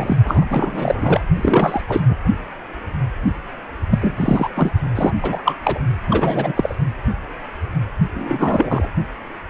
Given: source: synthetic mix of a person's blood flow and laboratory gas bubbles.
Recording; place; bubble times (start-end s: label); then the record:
Doppler ultrasound of blood flow; precordium
0.00-0.16 s: bubbles
0.24-0.45 s: bubbles
0.50-1.21 s: bubbles
1.35-1.82 s: bubbles
1.88-2.00 s: bubbles
2.08-2.16 s: bubbles
3.91-3.98 s: bubbles
4.01-4.49 s: bubbles
4.55-4.71 s: bubbles
4.95-5.13 s: bubbles
5.22-5.57 s: bubbles
5.63-5.79 s: bubbles
6.08-6.53 s: bubbles
6.57-6.75 s: bubbles
8.14-8.90 s: bubbles
From the record:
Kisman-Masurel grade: 333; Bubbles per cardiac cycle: rolling drumbeat, 9 or more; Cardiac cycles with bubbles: 50 to 99%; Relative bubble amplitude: loud (0.450 to 0.775); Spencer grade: 3 (all of the cardiac periods contain showers or single bubble signals, but not dominating or overriding the cardiac motion signals); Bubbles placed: only in the low amplitude regions of the cardiac cycle